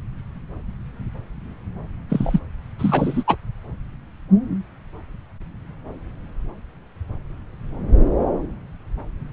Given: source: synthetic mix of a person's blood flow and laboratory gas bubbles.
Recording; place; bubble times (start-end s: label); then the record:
Doppler ultrasound of blood flow; subclavian vein
2.10-2.40 s: bubbles
2.79-3.24 s: bubbles
3.27-3.36 s: bubbles
From the record:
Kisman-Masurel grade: 223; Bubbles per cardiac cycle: several, 3 to 8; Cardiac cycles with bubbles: 10 to 50%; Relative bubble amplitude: loud (0.450 to 0.775); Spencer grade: 2 (many but less than half of the cardiac periods contain bubble signals, singularly or in groups); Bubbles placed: anywhere in the cardiac cycle